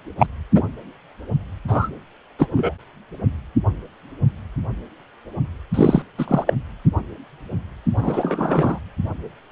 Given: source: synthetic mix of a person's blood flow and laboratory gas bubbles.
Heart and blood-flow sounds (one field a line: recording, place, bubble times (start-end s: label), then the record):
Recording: Doppler ultrasound of blood flow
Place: precordium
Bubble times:
0.19-0.27 s: bubbles
0.55-0.62 s: bubbles
1.68-1.89 s: bubbles
2.39-2.48 s: bubbles
2.52-2.74 s: bubbles
5.74-6.02 s: bubbles
6.18-6.44 s: bubbles
6.46-6.53 s: bubbles
7.96-8.79 s: bubbles
From the record:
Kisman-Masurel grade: 233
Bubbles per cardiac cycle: several, 3 to 8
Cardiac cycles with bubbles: 50 to 99%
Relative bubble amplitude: loud (0.450 to 0.775)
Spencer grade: 3 (all of the cardiac periods contain showers or single bubble signals, but not dominating or overriding the cardiac motion signals)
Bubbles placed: anywhere in the cardiac cycle